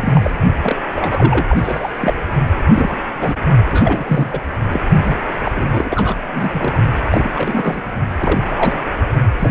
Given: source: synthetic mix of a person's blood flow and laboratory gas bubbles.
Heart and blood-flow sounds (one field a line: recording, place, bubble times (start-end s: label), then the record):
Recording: Doppler ultrasound of blood flow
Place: precordium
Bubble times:
0.00-0.30 s: bubbles
0.62-0.76 s: bubbles
0.96-1.46 s: bubbles
1.48-2.14 s: bubbles
2.68-2.96 s: bubbles
3.21-3.35 s: bubbles
3.66-4.41 s: bubbles
4.70-4.80 s: bubbles
5.04-5.16 s: bubbles
5.45-6.17 s: bubbles
6.32-6.74 s: bubbles
7.10-7.88 s: bubbles
8.17-8.40 s: bubbles
8.46-8.84 s: bubbles
9.39-9.51 s: bubbles
From the record:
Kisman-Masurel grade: 342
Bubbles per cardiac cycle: rolling drumbeat, 9 or more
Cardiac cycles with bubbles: 100%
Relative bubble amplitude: moderate (0.250 to 0.450)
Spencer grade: 3 (all of the cardiac periods contain showers or single bubble signals, but not dominating or overriding the cardiac motion signals)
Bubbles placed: only in the low amplitude regions of the cardiac cycle